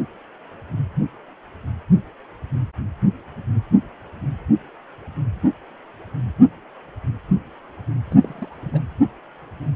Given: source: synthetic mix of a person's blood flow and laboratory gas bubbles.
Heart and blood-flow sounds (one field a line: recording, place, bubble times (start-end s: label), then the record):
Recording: Doppler ultrasound of blood flow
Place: precordium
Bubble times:
8.10-8.15 s: bubbles
8.22-8.55 s: bubbles
8.60-8.80 s: bubbles
From the record:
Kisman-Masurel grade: 211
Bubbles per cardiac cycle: several, 3 to 8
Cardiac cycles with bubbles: 1 to 10%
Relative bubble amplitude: barely perceptible (0.100 to 0.250)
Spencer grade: 1 (occasional bubble signal discernible with the cardiac motion signal, with majority of cardiac periods free of bubbles)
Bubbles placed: anywhere in the cardiac cycle